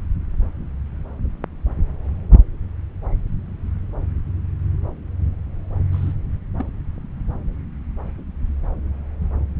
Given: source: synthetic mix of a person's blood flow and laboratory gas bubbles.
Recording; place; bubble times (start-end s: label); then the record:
Doppler ultrasound of blood flow; subclavian vein
5.92-6.13 s: bubbles
6.58-6.66 s: bubbles
From the record:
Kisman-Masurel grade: 121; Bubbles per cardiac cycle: 1 to 2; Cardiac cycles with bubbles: 10 to 50%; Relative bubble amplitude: barely perceptible (0.100 to 0.250); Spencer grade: 2 (many but less than half of the cardiac periods contain bubble signals, singularly or in groups); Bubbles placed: anywhere in the cardiac cycle